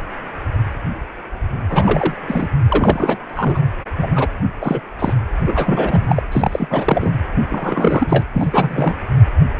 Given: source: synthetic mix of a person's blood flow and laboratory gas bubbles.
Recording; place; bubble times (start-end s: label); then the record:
Doppler ultrasound of blood flow; precordium
1.69-2.15 s: bubbles
2.27-2.48 s: bubbles
2.69-3.17 s: bubbles
3.29-3.60 s: bubbles
3.97-4.12 s: bubbles
4.16-4.28 s: bubbles
4.61-4.80 s: bubbles
4.99-5.13 s: bubbles
5.46-6.22 s: bubbles
6.31-6.67 s: bubbles
6.70-7.12 s: bubbles
7.50-8.22 s: bubbles
8.33-8.96 s: bubbles
From the record:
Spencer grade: 3 (all of the cardiac periods contain showers or single bubble signals, but not dominating or overriding the cardiac motion signals); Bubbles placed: anywhere in the cardiac cycle